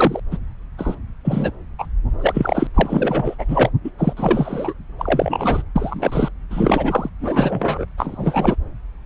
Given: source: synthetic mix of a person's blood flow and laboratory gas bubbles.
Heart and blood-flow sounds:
Doppler ultrasound of blood flow; subclavian vein
0.00-0.20 s: bubbles
0.31-0.38 s: bubbles
0.78-0.96 s: bubbles
1.25-1.52 s: bubbles
1.78-1.86 s: bubbles
2.18-2.67 s: bubbles
2.74-3.36 s: bubbles
3.38-3.45 s: bubbles
3.47-3.70 s: bubbles
3.84-3.91 s: bubbles
3.98-4.13 s: bubbles
4.17-4.74 s: bubbles
4.98-5.62 s: bubbles
5.75-6.29 s: bubbles
6.50-7.10 s: bubbles
7.21-7.85 s: bubbles
7.98-8.56 s: bubbles
From the record:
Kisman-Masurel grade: 243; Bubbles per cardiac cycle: several, 3 to 8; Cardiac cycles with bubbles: 100%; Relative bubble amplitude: loud (0.450 to 0.775); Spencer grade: 3 (all of the cardiac periods contain showers or single bubble signals, but not dominating or overriding the cardiac motion signals); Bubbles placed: anywhere in the cardiac cycle

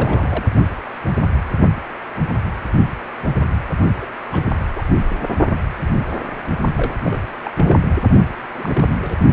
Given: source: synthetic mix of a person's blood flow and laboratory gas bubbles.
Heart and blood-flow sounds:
Doppler ultrasound of blood flow; precordium
0.00-0.44 s: bubbles
4.02-4.07 s: bubbles
4.32-4.42 s: bubbles
4.75-4.83 s: bubbles
6.77-6.94 s: bubbles
7.03-7.20 s: bubbles
7.43-7.50 s: bubbles
7.57-7.77 s: bubbles
8.56-9.16 s: bubbles
From the record:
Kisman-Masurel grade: 221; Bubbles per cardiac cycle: several, 3 to 8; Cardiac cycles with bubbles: 10 to 50%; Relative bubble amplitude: barely perceptible (0.100 to 0.250); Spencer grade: 2 (many but less than half of the cardiac periods contain bubble signals, singularly or in groups); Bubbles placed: only in the low amplitude regions of the cardiac cycle

